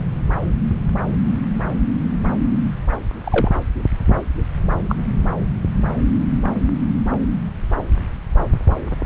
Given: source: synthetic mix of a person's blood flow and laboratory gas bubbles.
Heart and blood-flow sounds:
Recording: Doppler ultrasound of blood flow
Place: subclavian vein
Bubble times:
3.24-3.52 s: bubbles
4.88-4.96 s: bubbles
From the record:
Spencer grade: 1 (occasional bubble signal discernible with the cardiac motion signal, with majority of cardiac periods free of bubbles)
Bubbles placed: anywhere in the cardiac cycle

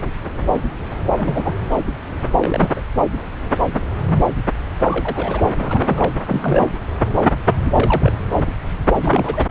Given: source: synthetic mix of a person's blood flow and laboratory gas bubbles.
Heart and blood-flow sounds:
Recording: Doppler ultrasound of blood flow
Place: subclavian vein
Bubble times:
1.16-1.53 s: bubbles
2.40-2.73 s: bubbles
2.76-2.80 s: bubbles
4.81-5.42 s: bubbles
5.58-6.16 s: bubbles
6.27-6.67 s: bubbles
7.72-8.12 s: bubbles
9.02-9.46 s: bubbles
From the record:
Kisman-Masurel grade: 222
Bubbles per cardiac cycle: several, 3 to 8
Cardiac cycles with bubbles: 10 to 50%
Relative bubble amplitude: moderate (0.250 to 0.450)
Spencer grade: 2 (many but less than half of the cardiac periods contain bubble signals, singularly or in groups)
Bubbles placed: anywhere in the cardiac cycle

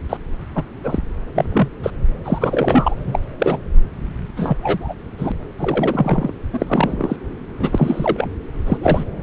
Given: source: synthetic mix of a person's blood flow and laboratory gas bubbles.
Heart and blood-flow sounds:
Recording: Doppler ultrasound of blood flow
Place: subclavian vein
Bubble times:
0.09-0.17 s: bubbles
0.55-0.62 s: bubbles
0.84-0.98 s: bubbles
1.34-1.45 s: bubbles
1.52-1.68 s: bubbles
1.83-1.90 s: bubbles
2.24-2.96 s: bubbles
3.07-3.19 s: bubbles
3.39-3.58 s: bubbles
4.37-4.57 s: bubbles
4.62-4.94 s: bubbles
5.18-5.32 s: bubbles
5.57-6.33 s: bubbles
6.53-7.16 s: bubbles
7.58-8.29 s: bubbles
8.66-8.77 s: bubbles
8.81-9.04 s: bubbles
From the record:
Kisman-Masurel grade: 242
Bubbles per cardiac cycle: several, 3 to 8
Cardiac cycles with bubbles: 100%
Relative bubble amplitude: moderate (0.250 to 0.450)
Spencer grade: 3 (all of the cardiac periods contain showers or single bubble signals, but not dominating or overriding the cardiac motion signals)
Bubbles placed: anywhere in the cardiac cycle

